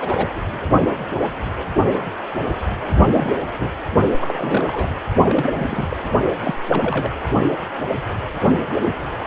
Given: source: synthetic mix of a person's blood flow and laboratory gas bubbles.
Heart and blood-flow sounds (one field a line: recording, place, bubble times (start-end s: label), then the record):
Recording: Doppler ultrasound of blood flow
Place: precordium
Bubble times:
0.00-0.28 s: bubbles
3.10-3.34 s: bubbles
3.59-3.69 s: bubbles
4.21-4.89 s: bubbles
5.29-5.97 s: bubbles
6.43-6.55 s: bubbles
6.69-7.16 s: bubbles
From the record:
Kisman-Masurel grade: 232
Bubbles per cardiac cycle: several, 3 to 8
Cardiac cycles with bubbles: 50 to 99%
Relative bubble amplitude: moderate (0.250 to 0.450)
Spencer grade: 3 (all of the cardiac periods contain showers or single bubble signals, but not dominating or overriding the cardiac motion signals)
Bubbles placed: only in the low amplitude regions of the cardiac cycle